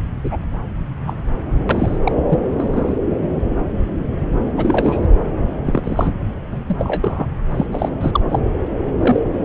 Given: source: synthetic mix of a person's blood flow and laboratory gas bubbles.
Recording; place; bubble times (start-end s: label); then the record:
Doppler ultrasound of blood flow; subclavian vein
0.24-0.40 s: bubbles
1.06-1.14 s: bubbles
1.69-1.98 s: bubbles
2.04-2.12 s: bubbles
2.28-2.39 s: bubbles
2.57-2.96 s: bubbles
4.57-5.07 s: bubbles
5.66-6.12 s: bubbles
6.52-6.61 s: bubbles
6.69-7.27 s: bubbles
7.49-7.66 s: bubbles
7.72-7.89 s: bubbles
8.00-8.21 s: bubbles
8.29-8.39 s: bubbles
8.98-9.21 s: bubbles
From the record:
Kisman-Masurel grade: 232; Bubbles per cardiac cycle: several, 3 to 8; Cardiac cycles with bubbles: 50 to 99%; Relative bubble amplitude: moderate (0.250 to 0.450); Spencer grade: 3 (all of the cardiac periods contain showers or single bubble signals, but not dominating or overriding the cardiac motion signals); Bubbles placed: anywhere in the cardiac cycle